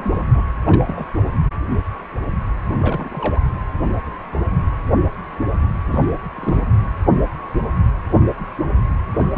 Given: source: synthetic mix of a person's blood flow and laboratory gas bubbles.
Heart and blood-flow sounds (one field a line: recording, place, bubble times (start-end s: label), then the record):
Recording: Doppler ultrasound of blood flow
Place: precordium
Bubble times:
0.00-0.24 s: bubbles
0.33-0.42 s: bubbles
0.65-1.06 s: bubbles
2.74-3.40 s: bubbles
5.86-6.13 s: bubbles
6.35-6.67 s: bubbles
9.13-9.38 s: bubbles
From the record:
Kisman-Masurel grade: 221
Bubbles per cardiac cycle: several, 3 to 8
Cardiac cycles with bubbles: 10 to 50%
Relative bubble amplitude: barely perceptible (0.100 to 0.250)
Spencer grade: 2 (many but less than half of the cardiac periods contain bubble signals, singularly or in groups)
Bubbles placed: anywhere in the cardiac cycle